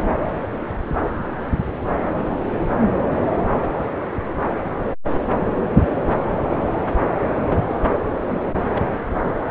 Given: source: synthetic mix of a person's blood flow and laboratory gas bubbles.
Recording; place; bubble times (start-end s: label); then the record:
Doppler ultrasound of blood flow; subclavian vein
8.21-8.58 s: bubbles
8.75-8.81 s: bubbles
From the record:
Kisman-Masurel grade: 111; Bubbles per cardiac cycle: 1 to 2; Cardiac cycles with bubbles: 1 to 10%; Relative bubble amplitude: barely perceptible (0.100 to 0.250); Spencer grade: 1 (occasional bubble signal discernible with the cardiac motion signal, with majority of cardiac periods free of bubbles); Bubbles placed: anywhere in the cardiac cycle